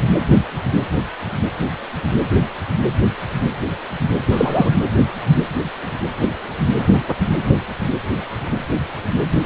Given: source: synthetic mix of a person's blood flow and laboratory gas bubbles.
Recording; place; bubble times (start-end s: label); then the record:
Doppler ultrasound of blood flow; precordium
4.32-4.75 s: bubbles
From the record:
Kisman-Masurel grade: 113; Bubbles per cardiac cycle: 1 to 2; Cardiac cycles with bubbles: 1 to 10%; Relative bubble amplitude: loud (0.450 to 0.775); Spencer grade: 1 (occasional bubble signal discernible with the cardiac motion signal, with majority of cardiac periods free of bubbles); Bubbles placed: anywhere in the cardiac cycle